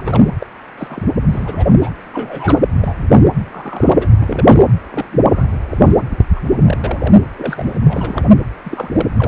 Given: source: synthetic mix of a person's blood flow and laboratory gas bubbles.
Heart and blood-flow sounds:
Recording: Doppler ultrasound of blood flow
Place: precordium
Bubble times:
0.00-0.02 s: bubbles
0.05-0.24 s: bubbles
0.40-0.47 s: bubbles
0.77-1.02 s: bubbles
1.29-1.67 s: bubbles
1.81-1.91 s: bubbles
2.04-2.06 s: bubbles
2.13-2.58 s: bubbles
2.77-3.10 s: bubbles
3.52-4.10 s: bubbles
4.19-4.64 s: bubbles
4.92-5.06 s: bubbles
5.12-5.19 s: bubbles
5.29-5.47 s: bubbles
5.70-5.78 s: bubbles
5.80-5.95 s: bubbles
6.09-6.22 s: bubbles
6.36-6.41 s: bubbles
6.65-6.78 s: bubbles
6.84-7.14 s: bubbles
7.37-7.76 s: bubbles
7.88-8.23 s: bubbles
8.63-9.06 s: bubbles
9.15-9.28 s: bubbles
From the record:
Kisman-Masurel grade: 242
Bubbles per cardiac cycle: several, 3 to 8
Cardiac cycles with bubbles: 100%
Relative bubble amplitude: moderate (0.250 to 0.450)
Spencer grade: 3 (all of the cardiac periods contain showers or single bubble signals, but not dominating or overriding the cardiac motion signals)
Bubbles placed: anywhere in the cardiac cycle

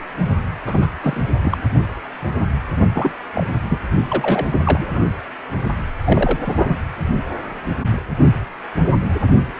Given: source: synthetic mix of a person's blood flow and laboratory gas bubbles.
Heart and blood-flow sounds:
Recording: Doppler ultrasound of blood flow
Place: precordium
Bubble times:
0.00-0.03 s: bubbles
0.66-0.89 s: bubbles
1.01-1.21 s: bubbles
1.42-1.57 s: bubbles
2.92-3.11 s: bubbles
3.34-3.46 s: bubbles
3.54-3.59 s: bubbles
3.69-3.79 s: bubbles
4.08-4.62 s: bubbles
4.64-5.07 s: bubbles
6.04-6.39 s: bubbles
6.43-6.80 s: bubbles
From the record:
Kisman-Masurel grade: 232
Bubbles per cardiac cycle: several, 3 to 8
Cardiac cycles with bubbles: 50 to 99%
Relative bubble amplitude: moderate (0.250 to 0.450)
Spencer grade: 3 (all of the cardiac periods contain showers or single bubble signals, but not dominating or overriding the cardiac motion signals)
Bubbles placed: only in the low amplitude regions of the cardiac cycle

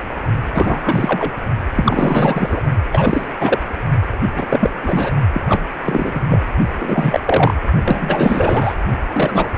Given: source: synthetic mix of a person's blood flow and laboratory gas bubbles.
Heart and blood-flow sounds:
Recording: Doppler ultrasound of blood flow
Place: precordium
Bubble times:
0.54-1.34 s: bubbles
1.73-2.62 s: bubbles
2.92-3.27 s: bubbles
3.38-3.62 s: bubbles
4.35-4.70 s: bubbles
4.82-5.12 s: bubbles
5.33-5.41 s: bubbles
5.49-5.62 s: bubbles
5.84-6.21 s: bubbles
6.28-6.42 s: bubbles
6.79-7.20 s: bubbles
7.25-7.54 s: bubbles
7.85-8.76 s: bubbles
9.12-9.52 s: bubbles
From the record:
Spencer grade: 3 (all of the cardiac periods contain showers or single bubble signals, but not dominating or overriding the cardiac motion signals)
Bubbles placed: only in the low amplitude regions of the cardiac cycle

